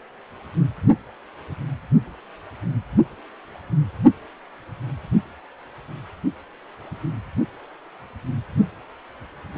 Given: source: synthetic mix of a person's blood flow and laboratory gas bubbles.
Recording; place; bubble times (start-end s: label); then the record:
Doppler ultrasound of blood flow; precordium
no bubbles
From the record:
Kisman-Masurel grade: 000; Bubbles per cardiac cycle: 0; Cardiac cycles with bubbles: 0%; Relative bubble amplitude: no bubbles discernible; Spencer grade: 0 (complete lack of bubble signals)